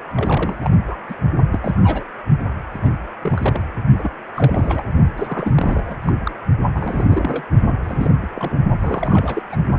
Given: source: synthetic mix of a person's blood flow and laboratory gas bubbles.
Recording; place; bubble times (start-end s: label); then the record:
Doppler ultrasound of blood flow; precordium
0.15-0.77 s: bubbles
0.87-0.95 s: bubbles
1.08-1.15 s: bubbles
1.52-1.59 s: bubbles
1.62-2.05 s: bubbles
2.73-2.98 s: bubbles
3.21-3.61 s: bubbles
3.95-4.11 s: bubbles
4.36-4.86 s: bubbles
5.18-5.97 s: bubbles
6.02-6.12 s: bubbles
6.25-6.31 s: bubbles
6.75-7.44 s: bubbles
7.82-8.12 s: bubbles
8.22-8.27 s: bubbles
8.35-8.58 s: bubbles
8.80-9.43 s: bubbles
9.50-9.70 s: bubbles
From the record:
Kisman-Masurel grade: 342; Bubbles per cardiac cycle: rolling drumbeat, 9 or more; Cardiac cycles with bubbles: 100%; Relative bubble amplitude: moderate (0.250 to 0.450); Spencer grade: 3 (all of the cardiac periods contain showers or single bubble signals, but not dominating or overriding the cardiac motion signals); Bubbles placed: only in the low amplitude regions of the cardiac cycle